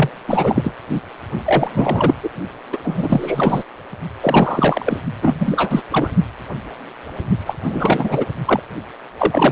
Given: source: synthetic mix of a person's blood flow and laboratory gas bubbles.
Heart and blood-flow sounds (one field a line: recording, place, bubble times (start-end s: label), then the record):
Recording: Doppler ultrasound of blood flow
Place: precordium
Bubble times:
0.00-0.09 s: bubbles
0.27-0.72 s: bubbles
0.89-1.01 s: bubbles
1.44-1.71 s: bubbles
1.74-2.14 s: bubbles
2.23-2.29 s: bubbles
2.72-2.79 s: bubbles
2.83-3.63 s: bubbles
4.21-5.02 s: bubbles
5.21-5.82 s: bubbles
5.91-6.08 s: bubbles
7.46-7.54 s: bubbles
7.63-8.25 s: bubbles
8.45-8.60 s: bubbles
9.18-9.52 s: bubbles
From the record:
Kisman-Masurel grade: 333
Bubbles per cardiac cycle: rolling drumbeat, 9 or more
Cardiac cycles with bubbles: 50 to 99%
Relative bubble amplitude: loud (0.450 to 0.775)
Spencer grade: 3 (all of the cardiac periods contain showers or single bubble signals, but not dominating or overriding the cardiac motion signals)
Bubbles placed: only in the low amplitude regions of the cardiac cycle